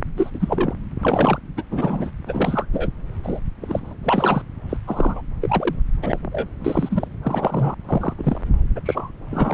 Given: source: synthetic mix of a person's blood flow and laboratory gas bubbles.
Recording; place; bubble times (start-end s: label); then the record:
Doppler ultrasound of blood flow; subclavian vein
0.17-0.31 s: bubbles
0.34-0.74 s: bubbles
1.02-1.38 s: bubbles
1.57-1.63 s: bubbles
1.70-2.11 s: bubbles
2.26-2.66 s: bubbles
2.73-2.90 s: bubbles
3.23-3.40 s: bubbles
3.62-3.93 s: bubbles
4.03-4.42 s: bubbles
4.69-4.77 s: bubbles
4.87-5.21 s: bubbles
5.42-5.75 s: bubbles
6.02-6.19 s: bubbles
6.32-6.48 s: bubbles
6.65-7.08 s: bubbles
7.23-7.75 s: bubbles
7.89-8.13 s: bubbles
8.18-8.41 s: bubbles
8.75-8.80 s: bubbles
8.85-9.10 s: bubbles
9.31-9.54 s: bubbles
From the record:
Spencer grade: 3 (all of the cardiac periods contain showers or single bubble signals, but not dominating or overriding the cardiac motion signals); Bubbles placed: anywhere in the cardiac cycle